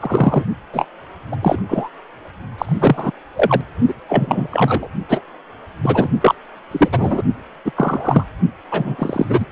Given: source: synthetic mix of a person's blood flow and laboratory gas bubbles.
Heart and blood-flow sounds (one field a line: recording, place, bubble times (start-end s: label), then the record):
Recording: Doppler ultrasound of blood flow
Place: precordium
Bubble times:
0.00-0.43 s: bubbles
0.73-0.85 s: bubbles
1.32-1.36 s: bubbles
1.42-1.62 s: bubbles
1.69-1.89 s: bubbles
2.58-3.11 s: bubbles
3.35-3.61 s: bubbles
3.88-3.94 s: bubbles
4.08-4.48 s: bubbles
4.50-4.88 s: bubbles
5.09-5.21 s: bubbles
5.82-6.09 s: bubbles
6.21-6.35 s: bubbles
6.71-6.88 s: bubbles
6.92-7.22 s: bubbles
7.65-7.71 s: bubbles
7.76-8.24 s: bubbles
8.71-8.96 s: bubbles
8.98-9.25 s: bubbles
9.28-9.45 s: bubbles
From the record:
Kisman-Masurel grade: 243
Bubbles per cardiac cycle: several, 3 to 8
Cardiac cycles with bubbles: 100%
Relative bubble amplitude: loud (0.450 to 0.775)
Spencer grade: 3 (all of the cardiac periods contain showers or single bubble signals, but not dominating or overriding the cardiac motion signals)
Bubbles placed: only in the low amplitude regions of the cardiac cycle